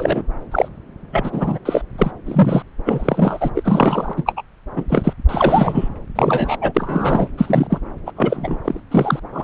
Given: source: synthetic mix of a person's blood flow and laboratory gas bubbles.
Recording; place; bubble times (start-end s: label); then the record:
Doppler ultrasound of blood flow; subclavian vein
0.00-0.22 s: bubbles
0.51-0.68 s: bubbles
1.12-1.59 s: bubbles
1.65-1.82 s: bubbles
1.98-2.11 s: bubbles
2.26-2.62 s: bubbles
2.85-3.50 s: bubbles
3.54-4.13 s: bubbles
4.16-4.23 s: bubbles
4.26-4.33 s: bubbles
4.37-4.42 s: bubbles
4.76-4.84 s: bubbles
4.88-5.13 s: bubbles
5.29-5.88 s: bubbles
6.15-6.56 s: bubbles
6.61-6.72 s: bubbles
6.75-7.27 s: bubbles
7.37-7.80 s: bubbles
8.06-8.12 s: bubbles
8.16-8.57 s: bubbles
8.64-8.80 s: bubbles
8.90-9.20 s: bubbles
9.32-9.44 s: bubbles
From the record:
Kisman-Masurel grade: 243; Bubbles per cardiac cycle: several, 3 to 8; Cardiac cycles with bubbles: 100%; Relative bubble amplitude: loud (0.450 to 0.775); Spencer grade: 3 (all of the cardiac periods contain showers or single bubble signals, but not dominating or overriding the cardiac motion signals); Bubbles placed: anywhere in the cardiac cycle